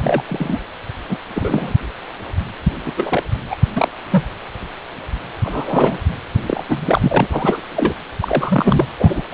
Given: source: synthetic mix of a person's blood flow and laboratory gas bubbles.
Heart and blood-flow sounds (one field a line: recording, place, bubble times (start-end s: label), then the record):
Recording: Doppler ultrasound of blood flow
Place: precordium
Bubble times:
0.00-0.24 s: bubbles
0.27-0.59 s: bubbles
1.08-1.18 s: bubbles
1.34-1.73 s: bubbles
2.85-2.92 s: bubbles
2.97-3.23 s: bubbles
3.50-3.56 s: bubbles
3.75-3.89 s: bubbles
4.11-4.24 s: bubbles
5.44-5.98 s: bubbles
6.47-6.63 s: bubbles
6.69-7.27 s: bubbles
7.30-7.61 s: bubbles
7.76-7.95 s: bubbles
8.20-8.87 s: bubbles
8.99-9.22 s: bubbles
9.31-9.34 s: bubbles
From the record:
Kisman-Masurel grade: 233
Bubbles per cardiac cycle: several, 3 to 8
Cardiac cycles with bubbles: 50 to 99%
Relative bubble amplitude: loud (0.450 to 0.775)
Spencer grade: 3 (all of the cardiac periods contain showers or single bubble signals, but not dominating or overriding the cardiac motion signals)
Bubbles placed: anywhere in the cardiac cycle